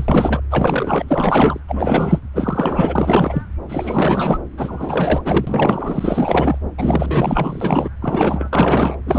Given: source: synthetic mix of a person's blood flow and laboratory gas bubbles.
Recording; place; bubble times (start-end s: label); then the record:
Doppler ultrasound of blood flow; subclavian vein
0.00-0.41 s: bubbles
0.50-1.04 s: bubbles
1.08-1.60 s: bubbles
1.68-2.20 s: bubbles
2.33-3.42 s: bubbles
3.69-4.42 s: bubbles
4.57-5.21 s: bubbles
5.24-6.58 s: bubbles
6.78-7.89 s: bubbles
8.01-8.48 s: bubbles
8.52-8.97 s: bubbles
9.06-9.19 s: bubbles
From the record:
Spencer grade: 4 (maximum detectable bubble signal sounding continuously throughout systole and diastole of every cardiac period, and overriding the amplitude of the normal cardiac signals); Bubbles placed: anywhere in the cardiac cycle